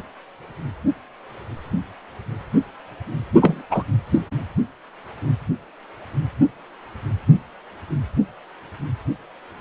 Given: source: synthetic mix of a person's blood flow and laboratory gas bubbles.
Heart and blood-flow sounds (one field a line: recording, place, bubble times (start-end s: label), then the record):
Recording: Doppler ultrasound of blood flow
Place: precordium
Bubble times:
3.42-3.62 s: bubbles
3.71-3.83 s: bubbles
4.12-4.19 s: bubbles
From the record:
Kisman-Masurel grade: 213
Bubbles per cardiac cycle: several, 3 to 8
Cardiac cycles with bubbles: 1 to 10%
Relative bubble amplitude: loud (0.450 to 0.775)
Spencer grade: 1 (occasional bubble signal discernible with the cardiac motion signal, with majority of cardiac periods free of bubbles)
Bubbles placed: only in the low amplitude regions of the cardiac cycle